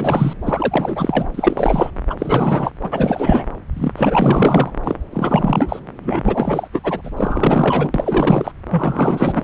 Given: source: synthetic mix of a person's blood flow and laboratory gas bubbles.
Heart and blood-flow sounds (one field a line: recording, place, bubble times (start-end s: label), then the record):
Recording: Doppler ultrasound of blood flow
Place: subclavian vein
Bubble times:
0.00-0.33 s: bubbles
0.44-1.29 s: bubbles
1.34-1.90 s: bubbles
2.09-2.15 s: bubbles
2.17-2.72 s: bubbles
2.82-3.44 s: bubbles
3.76-3.92 s: bubbles
3.96-4.70 s: bubbles
4.83-4.96 s: bubbles
5.12-5.79 s: bubbles
6.02-6.68 s: bubbles
6.72-7.09 s: bubbles
7.17-7.92 s: bubbles
7.94-8.52 s: bubbles
8.71-9.44 s: bubbles
From the record:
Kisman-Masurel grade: 444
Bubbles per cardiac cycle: continuous sound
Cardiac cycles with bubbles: 100%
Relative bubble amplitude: maximal (0.775 to 0.999)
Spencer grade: 4 (maximum detectable bubble signal sounding continuously throughout systole and diastole of every cardiac period, and overriding the amplitude of the normal cardiac signals)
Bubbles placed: anywhere in the cardiac cycle